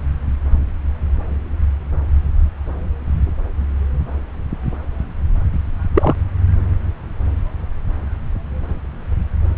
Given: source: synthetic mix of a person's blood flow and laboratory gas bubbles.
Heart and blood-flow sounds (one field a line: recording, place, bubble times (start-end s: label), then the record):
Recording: Doppler ultrasound of blood flow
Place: subclavian vein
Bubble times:
5.95-6.16 s: bubbles
From the record:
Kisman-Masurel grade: 113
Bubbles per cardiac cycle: 1 to 2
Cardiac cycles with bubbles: 1 to 10%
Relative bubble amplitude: loud (0.450 to 0.775)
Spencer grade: 1 (occasional bubble signal discernible with the cardiac motion signal, with majority of cardiac periods free of bubbles)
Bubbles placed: anywhere in the cardiac cycle